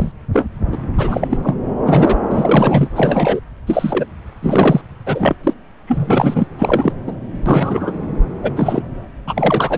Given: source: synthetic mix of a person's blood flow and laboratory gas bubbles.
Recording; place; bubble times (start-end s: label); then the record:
Doppler ultrasound of blood flow; subclavian vein
0.00-0.11 s: bubbles
0.33-0.47 s: bubbles
0.72-0.78 s: bubbles
0.97-1.27 s: bubbles
1.30-1.38 s: bubbles
1.42-1.55 s: bubbles
1.86-2.17 s: bubbles
2.31-2.88 s: bubbles
2.96-3.40 s: bubbles
3.67-4.05 s: bubbles
4.41-4.82 s: bubbles
5.07-5.36 s: bubbles
5.43-5.54 s: bubbles
5.87-6.47 s: bubbles
6.58-6.92 s: bubbles
7.07-7.16 s: bubbles
7.46-7.92 s: bubbles
8.42-8.51 s: bubbles
8.56-8.82 s: bubbles
9.27-9.77 s: bubbles
From the record:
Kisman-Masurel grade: 243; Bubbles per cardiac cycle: several, 3 to 8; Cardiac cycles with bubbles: 100%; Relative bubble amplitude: loud (0.450 to 0.775); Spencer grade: 3 (all of the cardiac periods contain showers or single bubble signals, but not dominating or overriding the cardiac motion signals); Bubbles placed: anywhere in the cardiac cycle